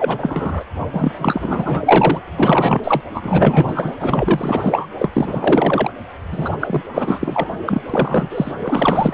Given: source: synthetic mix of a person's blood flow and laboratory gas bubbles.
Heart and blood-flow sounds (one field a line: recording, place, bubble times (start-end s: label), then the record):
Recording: Doppler ultrasound of blood flow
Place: precordium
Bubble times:
0.00-0.64 s: bubbles
0.93-1.12 s: bubbles
1.20-2.18 s: bubbles
2.38-3.00 s: bubbles
3.14-3.96 s: bubbles
4.00-4.86 s: bubbles
4.97-5.09 s: bubbles
5.13-5.91 s: bubbles
6.31-6.83 s: bubbles
6.92-7.50 s: bubbles
7.65-7.81 s: bubbles
7.89-8.52 s: bubbles
8.60-9.14 s: bubbles
From the record:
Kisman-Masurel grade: 444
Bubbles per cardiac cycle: continuous sound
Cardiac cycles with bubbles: 100%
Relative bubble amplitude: maximal (0.775 to 0.999)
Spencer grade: 4 (maximum detectable bubble signal sounding continuously throughout systole and diastole of every cardiac period, and overriding the amplitude of the normal cardiac signals)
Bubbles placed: anywhere in the cardiac cycle